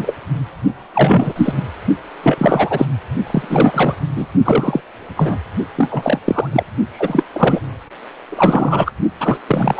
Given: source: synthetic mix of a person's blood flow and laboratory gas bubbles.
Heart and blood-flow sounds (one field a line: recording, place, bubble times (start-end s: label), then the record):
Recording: Doppler ultrasound of blood flow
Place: precordium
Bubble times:
0.00-0.13 s: bubbles
0.93-1.63 s: bubbles
2.23-2.86 s: bubbles
3.26-3.95 s: bubbles
4.16-4.26 s: bubbles
4.43-4.81 s: bubbles
4.98-5.38 s: bubbles
5.76-6.19 s: bubbles
6.25-6.47 s: bubbles
6.52-6.63 s: bubbles
6.92-7.23 s: bubbles
7.33-7.60 s: bubbles
8.30-8.92 s: bubbles
9.20-9.38 s: bubbles
9.47-9.80 s: bubbles
From the record:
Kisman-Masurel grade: 343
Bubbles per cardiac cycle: rolling drumbeat, 9 or more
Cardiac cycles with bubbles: 100%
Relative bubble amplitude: loud (0.450 to 0.775)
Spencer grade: 3 (all of the cardiac periods contain showers or single bubble signals, but not dominating or overriding the cardiac motion signals)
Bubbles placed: only in the low amplitude regions of the cardiac cycle